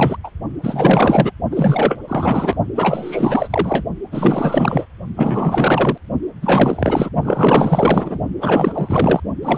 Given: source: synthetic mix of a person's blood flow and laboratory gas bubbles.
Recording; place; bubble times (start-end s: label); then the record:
Doppler ultrasound of blood flow; precordium
0.00-0.17 s: bubbles
0.23-0.30 s: bubbles
0.62-1.31 s: bubbles
1.50-2.00 s: bubbles
2.08-2.55 s: bubbles
2.75-3.84 s: bubbles
4.12-4.86 s: bubbles
5.17-5.98 s: bubbles
6.42-7.10 s: bubbles
7.23-8.20 s: bubbles
8.41-9.21 s: bubbles
9.42-9.58 s: bubbles
From the record:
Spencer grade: 4 (maximum detectable bubble signal sounding continuously throughout systole and diastole of every cardiac period, and overriding the amplitude of the normal cardiac signals); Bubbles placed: only in the low amplitude regions of the cardiac cycle